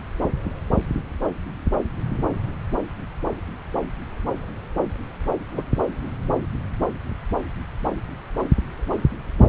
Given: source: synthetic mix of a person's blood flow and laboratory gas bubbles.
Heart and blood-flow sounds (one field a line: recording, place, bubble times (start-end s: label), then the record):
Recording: Doppler ultrasound of blood flow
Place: subclavian vein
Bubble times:
5.54-5.65 s: bubbles
From the record:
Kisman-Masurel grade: 111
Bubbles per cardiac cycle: 1 to 2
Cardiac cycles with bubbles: 1 to 10%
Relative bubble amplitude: barely perceptible (0.100 to 0.250)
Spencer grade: 1 (occasional bubble signal discernible with the cardiac motion signal, with majority of cardiac periods free of bubbles)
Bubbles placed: anywhere in the cardiac cycle